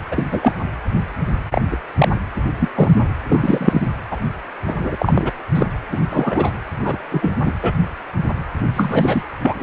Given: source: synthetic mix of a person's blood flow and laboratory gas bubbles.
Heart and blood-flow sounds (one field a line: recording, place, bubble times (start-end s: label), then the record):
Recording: Doppler ultrasound of blood flow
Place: precordium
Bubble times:
0.11-0.26 s: bubbles
0.31-0.53 s: bubbles
1.50-1.61 s: bubbles
1.71-1.77 s: bubbles
1.98-2.08 s: bubbles
2.58-2.69 s: bubbles
2.75-2.89 s: bubbles
3.29-3.86 s: bubbles
4.11-4.17 s: bubbles
4.67-4.75 s: bubbles
4.80-4.95 s: bubbles
4.99-5.31 s: bubbles
5.54-5.66 s: bubbles
5.92-5.99 s: bubbles
6.10-6.51 s: bubbles
6.79-6.98 s: bubbles
7.11-7.33 s: bubbles
7.45-7.53 s: bubbles
7.62-7.72 s: bubbles
8.74-9.22 s: bubbles
9.43-9.63 s: bubbles
From the record:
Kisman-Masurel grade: 233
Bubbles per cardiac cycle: several, 3 to 8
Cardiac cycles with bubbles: 50 to 99%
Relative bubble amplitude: loud (0.450 to 0.775)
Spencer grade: 3 (all of the cardiac periods contain showers or single bubble signals, but not dominating or overriding the cardiac motion signals)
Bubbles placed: anywhere in the cardiac cycle